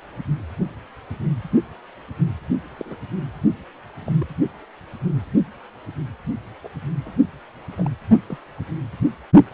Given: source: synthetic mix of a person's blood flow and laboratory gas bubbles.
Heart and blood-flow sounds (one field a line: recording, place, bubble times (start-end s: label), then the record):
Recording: Doppler ultrasound of blood flow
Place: precordium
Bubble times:
2.78-2.96 s: bubbles
4.04-4.12 s: bubbles
4.20-4.27 s: bubbles
6.63-6.67 s: bubbles
7.05-7.11 s: bubbles
7.78-7.89 s: bubbles
8.29-8.38 s: bubbles
From the record:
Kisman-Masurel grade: 121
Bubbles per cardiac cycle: 1 to 2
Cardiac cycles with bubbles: 10 to 50%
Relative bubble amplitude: barely perceptible (0.100 to 0.250)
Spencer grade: 2 (many but less than half of the cardiac periods contain bubble signals, singularly or in groups)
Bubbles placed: only in the low amplitude regions of the cardiac cycle